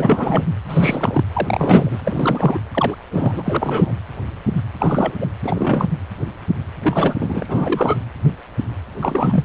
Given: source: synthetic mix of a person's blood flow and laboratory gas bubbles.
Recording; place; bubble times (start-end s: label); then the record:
Doppler ultrasound of blood flow; precordium
0.00-0.44 s: bubbles
0.69-1.24 s: bubbles
1.34-2.00 s: bubbles
2.04-2.58 s: bubbles
2.71-2.96 s: bubbles
3.11-3.92 s: bubbles
4.78-5.17 s: bubbles
5.21-5.28 s: bubbles
5.42-5.91 s: bubbles
6.81-7.15 s: bubbles
7.18-7.97 s: bubbles
8.99-9.44 s: bubbles
From the record:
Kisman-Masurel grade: 332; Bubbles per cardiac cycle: rolling drumbeat, 9 or more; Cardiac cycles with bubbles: 50 to 99%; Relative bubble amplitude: moderate (0.250 to 0.450); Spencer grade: 3 (all of the cardiac periods contain showers or single bubble signals, but not dominating or overriding the cardiac motion signals); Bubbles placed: anywhere in the cardiac cycle